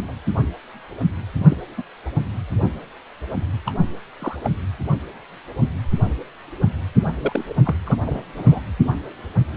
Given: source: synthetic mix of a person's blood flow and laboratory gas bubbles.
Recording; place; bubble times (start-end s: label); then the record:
Doppler ultrasound of blood flow; precordium
0.00-0.13 s: bubbles
1.43-1.57 s: bubbles
1.77-1.82 s: bubbles
3.66-3.74 s: bubbles
4.19-4.37 s: bubbles
4.44-4.50 s: bubbles
7.07-7.12 s: bubbles
7.20-7.45 s: bubbles
7.49-7.54 s: bubbles
7.65-7.76 s: bubbles
7.87-7.97 s: bubbles
8.05-8.32 s: bubbles
8.35-8.61 s: bubbles
From the record:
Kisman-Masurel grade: 222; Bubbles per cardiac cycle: several, 3 to 8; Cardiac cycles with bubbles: 10 to 50%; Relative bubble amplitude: moderate (0.250 to 0.450); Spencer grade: 2 (many but less than half of the cardiac periods contain bubble signals, singularly or in groups); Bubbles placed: anywhere in the cardiac cycle